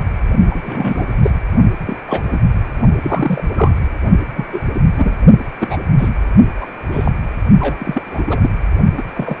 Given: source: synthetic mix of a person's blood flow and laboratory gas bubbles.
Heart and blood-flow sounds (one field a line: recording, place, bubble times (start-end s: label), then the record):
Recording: Doppler ultrasound of blood flow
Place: precordium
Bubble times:
0.00-0.03 s: bubbles
0.51-1.14 s: bubbles
1.23-1.31 s: bubbles
1.86-1.96 s: bubbles
2.08-2.22 s: bubbles
2.30-2.40 s: bubbles
3.02-3.42 s: bubbles
3.55-3.71 s: bubbles
4.36-4.46 s: bubbles
4.53-4.60 s: bubbles
4.75-4.82 s: bubbles
4.98-5.16 s: bubbles
5.61-5.78 s: bubbles
5.98-6.08 s: bubbles
6.58-6.67 s: bubbles
6.91-7.11 s: bubbles
7.60-8.52 s: bubbles
8.96-9.02 s: bubbles
9.13-9.38 s: bubbles
From the record:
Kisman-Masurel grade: 242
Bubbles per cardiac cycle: several, 3 to 8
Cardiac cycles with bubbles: 100%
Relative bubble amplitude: moderate (0.250 to 0.450)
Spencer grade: 3 (all of the cardiac periods contain showers or single bubble signals, but not dominating or overriding the cardiac motion signals)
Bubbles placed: only in the low amplitude regions of the cardiac cycle